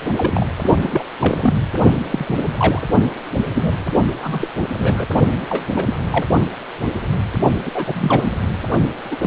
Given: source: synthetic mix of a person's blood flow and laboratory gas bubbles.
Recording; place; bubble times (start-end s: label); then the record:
Doppler ultrasound of blood flow; precordium
0.15-0.47 s: bubbles
0.61-1.03 s: bubbles
1.19-1.53 s: bubbles
2.02-2.37 s: bubbles
2.57-2.81 s: bubbles
3.54-3.73 s: bubbles
4.22-4.49 s: bubbles
4.78-5.05 s: bubbles
5.50-5.66 s: bubbles
5.75-5.94 s: bubbles
6.11-6.25 s: bubbles
7.66-7.71 s: bubbles
7.74-8.31 s: bubbles
9.11-9.16 s: bubbles
9.21-9.27 s: bubbles
From the record:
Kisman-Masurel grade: 232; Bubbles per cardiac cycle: several, 3 to 8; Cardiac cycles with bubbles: 50 to 99%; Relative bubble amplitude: moderate (0.250 to 0.450); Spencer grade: 3 (all of the cardiac periods contain showers or single bubble signals, but not dominating or overriding the cardiac motion signals); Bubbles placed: only in the low amplitude regions of the cardiac cycle